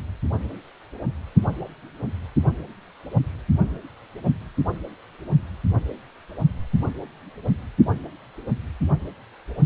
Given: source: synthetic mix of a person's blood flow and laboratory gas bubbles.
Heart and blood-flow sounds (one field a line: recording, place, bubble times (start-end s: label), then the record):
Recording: Doppler ultrasound of blood flow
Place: precordium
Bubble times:
no bubbles
From the record:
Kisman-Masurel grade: 000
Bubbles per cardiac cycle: 0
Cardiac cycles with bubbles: 0%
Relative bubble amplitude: no bubbles discernible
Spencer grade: 0 (complete lack of bubble signals)